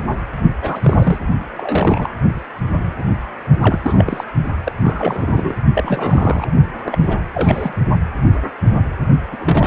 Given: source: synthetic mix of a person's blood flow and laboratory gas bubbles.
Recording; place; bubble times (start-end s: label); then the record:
Doppler ultrasound of blood flow; precordium
0.62-1.18 s: bubbles
1.51-2.15 s: bubbles
3.61-3.80 s: bubbles
3.82-4.24 s: bubbles
4.63-4.72 s: bubbles
4.83-5.54 s: bubbles
5.74-6.46 s: bubbles
6.84-7.17 s: bubbles
7.34-7.74 s: bubbles
9.32-9.67 s: bubbles
From the record:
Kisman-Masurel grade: 332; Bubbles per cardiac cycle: rolling drumbeat, 9 or more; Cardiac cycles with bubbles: 50 to 99%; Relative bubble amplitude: moderate (0.250 to 0.450); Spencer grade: 3 (all of the cardiac periods contain showers or single bubble signals, but not dominating or overriding the cardiac motion signals); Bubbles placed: only in the low amplitude regions of the cardiac cycle